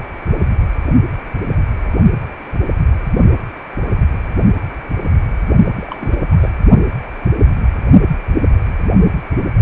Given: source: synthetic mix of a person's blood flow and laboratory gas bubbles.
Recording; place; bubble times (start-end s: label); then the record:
Doppler ultrasound of blood flow; precordium
5.66-5.71 s: bubbles
5.75-6.16 s: bubbles
6.32-6.37 s: bubbles
6.41-6.50 s: bubbles
From the record:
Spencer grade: 1 (occasional bubble signal discernible with the cardiac motion signal, with majority of cardiac periods free of bubbles); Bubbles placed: only in the low amplitude regions of the cardiac cycle